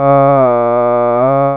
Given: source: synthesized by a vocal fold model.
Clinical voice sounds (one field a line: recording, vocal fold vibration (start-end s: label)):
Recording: sustained vowel that changes in the middle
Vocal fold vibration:
0.00-0.33 s: 138.3 Hz, open quotient 0.48
0.53-1.13 s: 120.0 Hz, open quotient 0.24
1.33-1.57 s: 138.3 Hz, open quotient 0.48